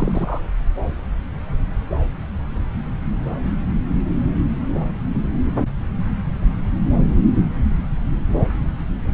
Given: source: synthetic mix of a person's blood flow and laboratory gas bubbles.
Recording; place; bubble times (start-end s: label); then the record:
Doppler ultrasound of blood flow; subclavian vein
0.00-0.40 s: bubbles
From the record:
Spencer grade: 1 (occasional bubble signal discernible with the cardiac motion signal, with majority of cardiac periods free of bubbles); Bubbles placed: anywhere in the cardiac cycle